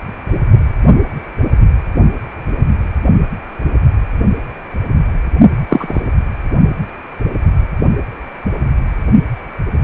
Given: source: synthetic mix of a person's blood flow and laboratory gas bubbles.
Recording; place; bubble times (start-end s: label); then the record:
Doppler ultrasound of blood flow; precordium
5.67-6.02 s: bubbles
From the record:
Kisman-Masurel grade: 113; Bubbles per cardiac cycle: 1 to 2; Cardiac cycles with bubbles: 1 to 10%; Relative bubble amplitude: loud (0.450 to 0.775); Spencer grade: 1 (occasional bubble signal discernible with the cardiac motion signal, with majority of cardiac periods free of bubbles); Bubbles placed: only in the low amplitude regions of the cardiac cycle